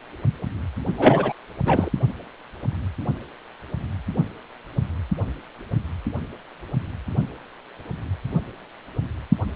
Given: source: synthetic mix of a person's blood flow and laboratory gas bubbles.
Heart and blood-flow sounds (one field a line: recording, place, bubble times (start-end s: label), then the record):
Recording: Doppler ultrasound of blood flow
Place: precordium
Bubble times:
0.98-1.32 s: bubbles
1.65-1.91 s: bubbles
From the record:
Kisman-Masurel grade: 213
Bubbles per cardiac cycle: several, 3 to 8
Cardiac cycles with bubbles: 1 to 10%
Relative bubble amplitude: loud (0.450 to 0.775)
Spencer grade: 1 (occasional bubble signal discernible with the cardiac motion signal, with majority of cardiac periods free of bubbles)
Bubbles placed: only in the low amplitude regions of the cardiac cycle